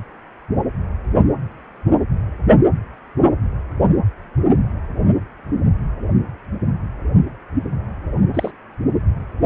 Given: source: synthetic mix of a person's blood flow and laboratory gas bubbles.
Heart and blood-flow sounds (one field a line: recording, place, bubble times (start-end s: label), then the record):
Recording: Doppler ultrasound of blood flow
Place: precordium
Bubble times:
8.33-8.51 s: bubbles
From the record:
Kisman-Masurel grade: 112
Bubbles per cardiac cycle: 1 to 2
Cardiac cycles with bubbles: 1 to 10%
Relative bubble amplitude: moderate (0.250 to 0.450)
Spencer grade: 1 (occasional bubble signal discernible with the cardiac motion signal, with majority of cardiac periods free of bubbles)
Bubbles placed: anywhere in the cardiac cycle